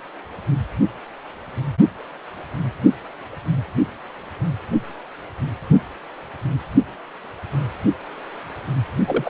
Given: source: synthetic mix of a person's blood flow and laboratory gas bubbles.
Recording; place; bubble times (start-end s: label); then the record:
Doppler ultrasound of blood flow; precordium
9.07-9.29 s: bubbles
From the record:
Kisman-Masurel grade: 122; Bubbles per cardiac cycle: 1 to 2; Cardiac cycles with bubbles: 10 to 50%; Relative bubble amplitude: moderate (0.250 to 0.450); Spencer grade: 2 (many but less than half of the cardiac periods contain bubble signals, singularly or in groups); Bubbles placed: only in the low amplitude regions of the cardiac cycle